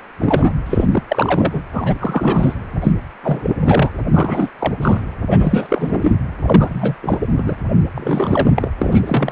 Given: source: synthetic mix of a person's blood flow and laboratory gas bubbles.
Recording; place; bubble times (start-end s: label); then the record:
Doppler ultrasound of blood flow; precordium
0.18-0.52 s: bubbles
0.66-1.03 s: bubbles
1.08-1.62 s: bubbles
1.72-1.95 s: bubbles
1.99-2.54 s: bubbles
2.81-2.92 s: bubbles
3.22-3.92 s: bubbles
4.13-4.50 s: bubbles
4.58-4.76 s: bubbles
4.81-5.01 s: bubbles
5.29-6.12 s: bubbles
6.42-6.95 s: bubbles
7.01-7.27 s: bubbles
7.37-7.56 s: bubbles
7.94-8.71 s: bubbles
8.78-9.03 s: bubbles
9.06-9.32 s: bubbles
From the record:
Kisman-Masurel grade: 343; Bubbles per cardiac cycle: rolling drumbeat, 9 or more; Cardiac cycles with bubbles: 100%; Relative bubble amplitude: loud (0.450 to 0.775); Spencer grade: 3 (all of the cardiac periods contain showers or single bubble signals, but not dominating or overriding the cardiac motion signals); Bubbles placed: anywhere in the cardiac cycle